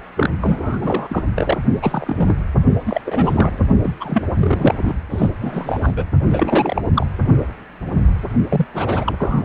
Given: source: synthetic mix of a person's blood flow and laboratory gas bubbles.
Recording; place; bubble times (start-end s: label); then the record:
Doppler ultrasound of blood flow; precordium
0.17-0.30 s: bubbles
0.41-1.23 s: bubbles
1.35-1.58 s: bubbles
1.82-2.39 s: bubbles
2.85-3.01 s: bubbles
3.06-3.58 s: bubbles
3.83-3.94 s: bubbles
4.00-4.22 s: bubbles
4.37-4.75 s: bubbles
4.84-4.94 s: bubbles
5.10-5.30 s: bubbles
5.41-5.92 s: bubbles
5.96-6.04 s: bubbles
6.25-6.82 s: bubbles
6.95-7.06 s: bubbles
8.49-8.67 s: bubbles
8.74-9.45 s: bubbles
From the record:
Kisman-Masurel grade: 332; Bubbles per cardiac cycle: rolling drumbeat, 9 or more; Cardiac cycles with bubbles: 50 to 99%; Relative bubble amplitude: moderate (0.250 to 0.450); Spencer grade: 3 (all of the cardiac periods contain showers or single bubble signals, but not dominating or overriding the cardiac motion signals); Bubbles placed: only in the low amplitude regions of the cardiac cycle